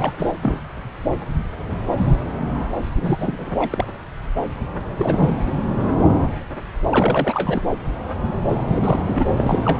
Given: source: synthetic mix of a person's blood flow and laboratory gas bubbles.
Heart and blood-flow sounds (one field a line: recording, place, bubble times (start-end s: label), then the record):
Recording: Doppler ultrasound of blood flow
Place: subclavian vein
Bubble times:
0.00-0.12 s: bubbles
0.17-0.33 s: bubbles
0.42-0.69 s: bubbles
2.96-3.86 s: bubbles
4.98-5.38 s: bubbles
5.46-5.52 s: bubbles
6.89-7.62 s: bubbles
8.47-9.25 s: bubbles
9.37-9.79 s: bubbles
From the record:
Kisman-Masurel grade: 332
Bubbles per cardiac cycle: rolling drumbeat, 9 or more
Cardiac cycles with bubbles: 50 to 99%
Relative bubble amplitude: moderate (0.250 to 0.450)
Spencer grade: 3 (all of the cardiac periods contain showers or single bubble signals, but not dominating or overriding the cardiac motion signals)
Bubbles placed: anywhere in the cardiac cycle